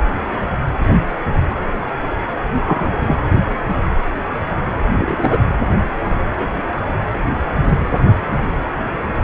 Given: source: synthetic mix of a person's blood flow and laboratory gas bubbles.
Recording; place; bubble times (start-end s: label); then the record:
Doppler ultrasound of blood flow; precordium
2.66-2.88 s: bubbles
3.01-3.16 s: bubbles
4.96-5.38 s: bubbles
6.26-6.59 s: bubbles
From the record:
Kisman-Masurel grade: 123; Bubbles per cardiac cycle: 1 to 2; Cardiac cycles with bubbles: 10 to 50%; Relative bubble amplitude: loud (0.450 to 0.775); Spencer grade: 2 (many but less than half of the cardiac periods contain bubble signals, singularly or in groups); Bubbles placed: anywhere in the cardiac cycle